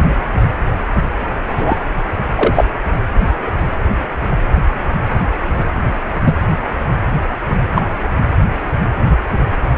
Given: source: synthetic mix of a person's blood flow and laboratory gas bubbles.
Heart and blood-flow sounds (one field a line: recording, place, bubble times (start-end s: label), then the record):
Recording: Doppler ultrasound of blood flow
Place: precordium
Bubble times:
1.48-1.78 s: bubbles
2.35-2.65 s: bubbles
6.24-6.35 s: bubbles
7.75-7.82 s: bubbles
From the record:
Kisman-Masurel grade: 123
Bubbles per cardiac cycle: 1 to 2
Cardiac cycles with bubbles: 10 to 50%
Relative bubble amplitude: loud (0.450 to 0.775)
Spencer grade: 2 (many but less than half of the cardiac periods contain bubble signals, singularly or in groups)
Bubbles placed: anywhere in the cardiac cycle